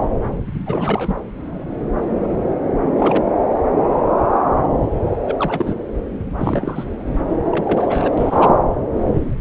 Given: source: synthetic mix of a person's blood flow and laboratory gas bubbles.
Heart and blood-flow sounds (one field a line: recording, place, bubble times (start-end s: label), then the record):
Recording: Doppler ultrasound of blood flow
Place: subclavian vein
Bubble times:
0.66-1.16 s: bubbles
2.97-3.23 s: bubbles
5.26-5.75 s: bubbles
6.38-6.84 s: bubbles
7.45-8.10 s: bubbles
8.17-8.58 s: bubbles
From the record:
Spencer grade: 2 (many but less than half of the cardiac periods contain bubble signals, singularly or in groups)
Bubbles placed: anywhere in the cardiac cycle